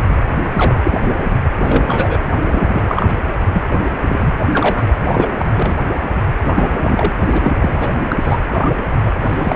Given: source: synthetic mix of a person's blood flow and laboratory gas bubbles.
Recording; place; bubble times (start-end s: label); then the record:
Doppler ultrasound of blood flow; precordium
0.54-0.76 s: bubbles
0.84-0.99 s: bubbles
1.64-2.19 s: bubbles
2.51-3.16 s: bubbles
3.52-3.62 s: bubbles
3.71-3.80 s: bubbles
3.85-3.90 s: bubbles
4.08-4.33 s: bubbles
4.53-4.88 s: bubbles
5.04-5.28 s: bubbles
5.38-5.75 s: bubbles
6.43-7.12 s: bubbles
7.25-7.53 s: bubbles
7.58-7.75 s: bubbles
7.79-7.98 s: bubbles
8.09-8.38 s: bubbles
8.52-8.71 s: bubbles
9.03-9.12 s: bubbles
9.21-9.56 s: bubbles
From the record:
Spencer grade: 3 (all of the cardiac periods contain showers or single bubble signals, but not dominating or overriding the cardiac motion signals); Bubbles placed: anywhere in the cardiac cycle